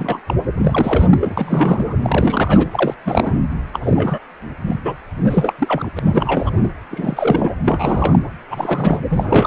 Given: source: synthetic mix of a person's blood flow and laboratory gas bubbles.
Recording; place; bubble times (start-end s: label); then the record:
Doppler ultrasound of blood flow; precordium
0.00-0.19 s: bubbles
0.26-0.34 s: bubbles
0.57-1.35 s: bubbles
1.37-1.99 s: bubbles
2.02-2.67 s: bubbles
2.71-2.94 s: bubbles
3.05-3.38 s: bubbles
3.73-3.79 s: bubbles
3.82-4.19 s: bubbles
4.67-4.79 s: bubbles
4.85-4.95 s: bubbles
5.17-5.54 s: bubbles
5.58-5.91 s: bubbles
5.96-5.99 s: bubbles
6.05-6.70 s: bubbles
6.91-7.55 s: bubbles
7.66-8.22 s: bubbles
8.50-9.01 s: bubbles
9.10-9.47 s: bubbles
From the record:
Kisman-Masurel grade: 342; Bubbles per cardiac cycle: rolling drumbeat, 9 or more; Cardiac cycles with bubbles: 100%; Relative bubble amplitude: moderate (0.250 to 0.450); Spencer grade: 3 (all of the cardiac periods contain showers or single bubble signals, but not dominating or overriding the cardiac motion signals); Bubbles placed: anywhere in the cardiac cycle